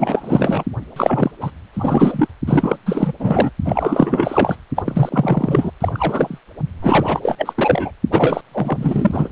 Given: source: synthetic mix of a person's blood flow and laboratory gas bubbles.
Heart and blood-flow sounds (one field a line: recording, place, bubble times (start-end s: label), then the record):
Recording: Doppler ultrasound of blood flow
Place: precordium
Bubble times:
0.00-0.64 s: bubbles
0.96-1.31 s: bubbles
1.41-1.51 s: bubbles
1.73-2.27 s: bubbles
2.46-2.76 s: bubbles
2.85-3.13 s: bubbles
3.19-3.49 s: bubbles
3.65-4.56 s: bubbles
4.75-4.83 s: bubbles
4.85-5.71 s: bubbles
5.80-6.39 s: bubbles
6.82-7.92 s: bubbles
8.12-8.41 s: bubbles
8.51-9.29 s: bubbles
From the record:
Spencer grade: 4 (maximum detectable bubble signal sounding continuously throughout systole and diastole of every cardiac period, and overriding the amplitude of the normal cardiac signals)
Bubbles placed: only in the low amplitude regions of the cardiac cycle